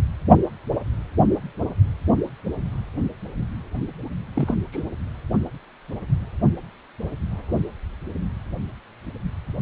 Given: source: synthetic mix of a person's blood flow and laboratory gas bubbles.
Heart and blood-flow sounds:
Doppler ultrasound of blood flow; precordium
4.35-4.55 s: bubbles
4.72-4.82 s: bubbles
From the record:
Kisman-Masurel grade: 211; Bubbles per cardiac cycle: several, 3 to 8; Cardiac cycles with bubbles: 1 to 10%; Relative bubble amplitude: barely perceptible (0.100 to 0.250); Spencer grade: 1 (occasional bubble signal discernible with the cardiac motion signal, with majority of cardiac periods free of bubbles); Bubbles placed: anywhere in the cardiac cycle

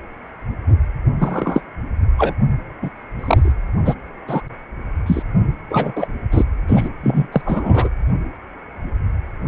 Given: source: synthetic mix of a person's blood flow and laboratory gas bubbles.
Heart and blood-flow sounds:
Doppler ultrasound of blood flow; precordium
1.19-1.61 s: bubbles
2.17-2.34 s: bubbles
2.82-2.90 s: bubbles
3.19-3.52 s: bubbles
3.85-3.94 s: bubbles
4.27-4.42 s: bubbles
5.06-5.22 s: bubbles
5.69-5.92 s: bubbles
5.95-6.07 s: bubbles
6.31-6.44 s: bubbles
6.67-6.89 s: bubbles
7.02-7.27 s: bubbles
7.32-7.42 s: bubbles
7.44-7.89 s: bubbles
From the record:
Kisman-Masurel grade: 223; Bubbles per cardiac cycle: several, 3 to 8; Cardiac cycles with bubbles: 10 to 50%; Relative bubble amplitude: loud (0.450 to 0.775); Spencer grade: 2 (many but less than half of the cardiac periods contain bubble signals, singularly or in groups); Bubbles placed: anywhere in the cardiac cycle

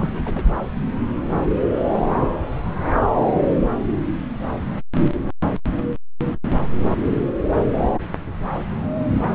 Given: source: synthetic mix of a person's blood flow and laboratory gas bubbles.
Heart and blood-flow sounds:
Doppler ultrasound of blood flow; subclavian vein
0.00-0.54 s: bubbles
From the record:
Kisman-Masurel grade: 211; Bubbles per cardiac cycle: several, 3 to 8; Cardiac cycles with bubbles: 1 to 10%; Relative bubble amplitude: barely perceptible (0.100 to 0.250); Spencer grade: 1 (occasional bubble signal discernible with the cardiac motion signal, with majority of cardiac periods free of bubbles); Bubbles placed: anywhere in the cardiac cycle

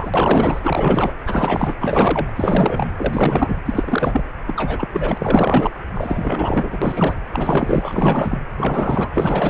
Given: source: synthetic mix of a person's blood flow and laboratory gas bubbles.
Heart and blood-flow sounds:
Doppler ultrasound of blood flow; precordium
0.00-1.12 s: bubbles
1.25-1.74 s: bubbles
1.80-2.32 s: bubbles
2.36-2.88 s: bubbles
2.97-3.56 s: bubbles
3.65-4.24 s: bubbles
4.47-4.88 s: bubbles
4.92-5.69 s: bubbles
5.94-6.78 s: bubbles
6.81-7.15 s: bubbles
7.33-8.38 s: bubbles
8.57-9.09 s: bubbles
9.13-9.50 s: bubbles
From the record:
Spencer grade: 4 (maximum detectable bubble signal sounding continuously throughout systole and diastole of every cardiac period, and overriding the amplitude of the normal cardiac signals); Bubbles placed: anywhere in the cardiac cycle

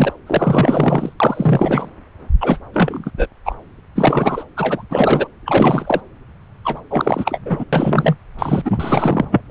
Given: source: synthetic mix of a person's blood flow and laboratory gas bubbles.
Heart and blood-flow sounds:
Doppler ultrasound of blood flow; subclavian vein
0.00-0.13 s: bubbles
0.26-1.13 s: bubbles
1.20-1.88 s: bubbles
2.40-2.59 s: bubbles
2.73-3.11 s: bubbles
3.17-3.27 s: bubbles
3.45-3.55 s: bubbles
3.95-4.44 s: bubbles
4.57-4.83 s: bubbles
4.90-5.28 s: bubbles
5.46-6.00 s: bubbles
6.64-6.80 s: bubbles
6.90-7.39 s: bubbles
7.46-7.64 s: bubbles
7.72-8.15 s: bubbles
8.38-8.62 s: bubbles
8.65-9.24 s: bubbles
9.31-9.41 s: bubbles
From the record:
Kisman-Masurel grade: 333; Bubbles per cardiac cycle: rolling drumbeat, 9 or more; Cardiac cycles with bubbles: 50 to 99%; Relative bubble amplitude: loud (0.450 to 0.775); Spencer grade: 3 (all of the cardiac periods contain showers or single bubble signals, but not dominating or overriding the cardiac motion signals); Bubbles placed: anywhere in the cardiac cycle

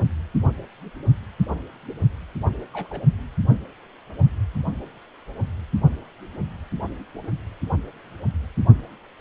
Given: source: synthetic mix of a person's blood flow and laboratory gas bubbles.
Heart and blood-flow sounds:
Doppler ultrasound of blood flow; precordium
2.73-2.88 s: bubbles
2.90-3.04 s: bubbles
From the record:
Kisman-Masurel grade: 111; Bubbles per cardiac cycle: 1 to 2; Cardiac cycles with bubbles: 1 to 10%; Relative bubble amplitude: barely perceptible (0.100 to 0.250); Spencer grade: 1 (occasional bubble signal discernible with the cardiac motion signal, with majority of cardiac periods free of bubbles); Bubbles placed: only in the low amplitude regions of the cardiac cycle

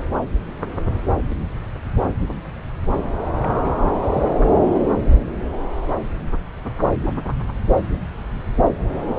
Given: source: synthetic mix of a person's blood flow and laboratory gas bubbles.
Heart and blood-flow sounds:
Doppler ultrasound of blood flow; subclavian vein
3.38-3.71 s: bubbles
4.01-4.34 s: bubbles
From the record:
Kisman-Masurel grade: 211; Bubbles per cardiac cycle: several, 3 to 8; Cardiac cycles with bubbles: 1 to 10%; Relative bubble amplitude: barely perceptible (0.100 to 0.250); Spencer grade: 1 (occasional bubble signal discernible with the cardiac motion signal, with majority of cardiac periods free of bubbles); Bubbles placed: anywhere in the cardiac cycle

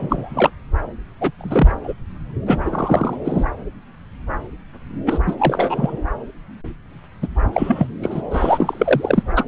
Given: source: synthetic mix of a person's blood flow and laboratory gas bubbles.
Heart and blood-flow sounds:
Doppler ultrasound of blood flow; subclavian vein
0.00-0.51 s: bubbles
1.21-1.31 s: bubbles
1.39-1.75 s: bubbles
1.83-1.94 s: bubbles
2.46-2.56 s: bubbles
2.65-3.16 s: bubbles
3.24-3.44 s: bubbles
5.06-5.18 s: bubbles
5.26-5.35 s: bubbles
5.38-5.98 s: bubbles
7.22-7.27 s: bubbles
7.52-7.87 s: bubbles
8.02-8.22 s: bubbles
8.30-9.23 s: bubbles
9.36-9.44 s: bubbles
From the record:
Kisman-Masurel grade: 233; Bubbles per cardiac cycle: several, 3 to 8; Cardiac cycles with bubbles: 50 to 99%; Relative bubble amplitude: loud (0.450 to 0.775); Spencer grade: 3 (all of the cardiac periods contain showers or single bubble signals, but not dominating or overriding the cardiac motion signals); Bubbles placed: anywhere in the cardiac cycle

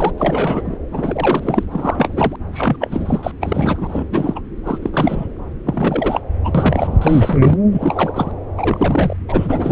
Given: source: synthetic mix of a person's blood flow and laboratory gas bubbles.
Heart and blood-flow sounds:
Doppler ultrasound of blood flow; subclavian vein
0.00-0.14 s: bubbles
0.18-0.78 s: bubbles
0.91-1.65 s: bubbles
1.71-2.36 s: bubbles
2.53-2.77 s: bubbles
2.80-3.31 s: bubbles
3.40-4.05 s: bubbles
4.11-4.40 s: bubbles
4.64-4.79 s: bubbles
4.82-5.27 s: bubbles
5.66-6.21 s: bubbles
6.44-6.98 s: bubbles
7.01-7.57 s: bubbles
7.72-8.32 s: bubbles
8.57-9.16 s: bubbles
9.29-9.72 s: bubbles
From the record:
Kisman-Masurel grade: 342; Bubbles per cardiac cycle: rolling drumbeat, 9 or more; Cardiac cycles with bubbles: 100%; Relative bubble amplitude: moderate (0.250 to 0.450); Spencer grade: 3 (all of the cardiac periods contain showers or single bubble signals, but not dominating or overriding the cardiac motion signals); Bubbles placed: anywhere in the cardiac cycle

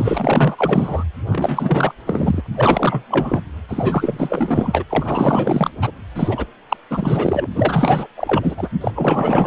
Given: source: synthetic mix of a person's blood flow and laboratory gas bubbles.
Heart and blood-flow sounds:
Doppler ultrasound of blood flow; precordium
0.00-1.04 s: bubbles
1.26-1.94 s: bubbles
2.06-2.42 s: bubbles
2.46-2.49 s: bubbles
2.54-3.05 s: bubbles
3.10-3.42 s: bubbles
3.69-4.83 s: bubbles
4.89-5.71 s: bubbles
5.81-5.92 s: bubbles
6.16-6.46 s: bubbles
6.70-6.77 s: bubbles
6.90-7.47 s: bubbles
7.56-8.07 s: bubbles
8.16-8.70 s: bubbles
8.80-8.91 s: bubbles
8.95-9.47 s: bubbles
From the record:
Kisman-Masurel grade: 444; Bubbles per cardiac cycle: continuous sound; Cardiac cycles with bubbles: 100%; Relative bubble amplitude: maximal (0.775 to 0.999); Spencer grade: 4 (maximum detectable bubble signal sounding continuously throughout systole and diastole of every cardiac period, and overriding the amplitude of the normal cardiac signals); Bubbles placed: anywhere in the cardiac cycle

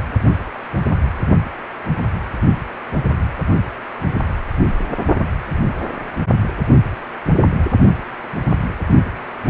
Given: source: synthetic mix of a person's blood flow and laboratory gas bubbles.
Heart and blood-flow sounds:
Doppler ultrasound of blood flow; precordium
no bubbles
From the record:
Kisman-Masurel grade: 000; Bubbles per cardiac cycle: 0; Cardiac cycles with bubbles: 0%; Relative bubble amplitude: no bubbles discernible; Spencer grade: 0 (complete lack of bubble signals)

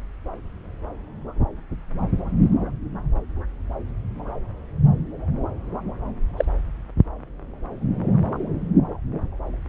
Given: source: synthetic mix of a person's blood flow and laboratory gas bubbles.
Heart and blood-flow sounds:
Doppler ultrasound of blood flow; subclavian vein
6.37-6.45 s: bubbles
From the record:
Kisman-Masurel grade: 122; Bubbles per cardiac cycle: 1 to 2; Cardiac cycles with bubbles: 10 to 50%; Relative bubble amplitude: moderate (0.250 to 0.450); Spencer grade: 2 (many but less than half of the cardiac periods contain bubble signals, singularly or in groups); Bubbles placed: anywhere in the cardiac cycle

